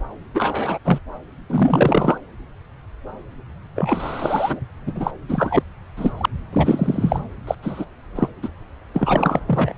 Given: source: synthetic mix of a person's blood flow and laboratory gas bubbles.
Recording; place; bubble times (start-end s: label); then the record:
Doppler ultrasound of blood flow; subclavian vein
0.34-0.78 s: bubbles
0.84-0.98 s: bubbles
1.49-2.18 s: bubbles
3.76-4.60 s: bubbles
4.86-4.92 s: bubbles
4.96-5.11 s: bubbles
5.29-5.62 s: bubbles
5.96-6.12 s: bubbles
6.17-6.25 s: bubbles
6.52-7.20 s: bubbles
7.47-7.55 s: bubbles
7.62-7.85 s: bubbles
8.15-8.29 s: bubbles
8.42-8.48 s: bubbles
8.94-9.39 s: bubbles
9.46-9.72 s: bubbles
From the record:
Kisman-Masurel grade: 233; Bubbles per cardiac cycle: several, 3 to 8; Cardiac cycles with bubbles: 50 to 99%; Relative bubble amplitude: loud (0.450 to 0.775); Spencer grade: 3 (all of the cardiac periods contain showers or single bubble signals, but not dominating or overriding the cardiac motion signals); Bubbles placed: anywhere in the cardiac cycle